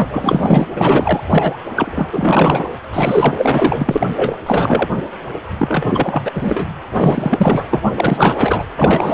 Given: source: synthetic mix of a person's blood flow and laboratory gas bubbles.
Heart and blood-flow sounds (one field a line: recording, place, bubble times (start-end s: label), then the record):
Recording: Doppler ultrasound of blood flow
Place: precordium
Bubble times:
0.00-0.70 s: bubbles
0.75-1.60 s: bubbles
1.75-2.64 s: bubbles
2.93-4.07 s: bubbles
4.13-4.42 s: bubbles
4.46-4.88 s: bubbles
5.58-6.32 s: bubbles
6.35-6.64 s: bubbles
6.94-7.64 s: bubbles
7.71-7.80 s: bubbles
7.84-7.91 s: bubbles
7.96-8.64 s: bubbles
8.76-9.14 s: bubbles
From the record:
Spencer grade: 4 (maximum detectable bubble signal sounding continuously throughout systole and diastole of every cardiac period, and overriding the amplitude of the normal cardiac signals)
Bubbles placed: anywhere in the cardiac cycle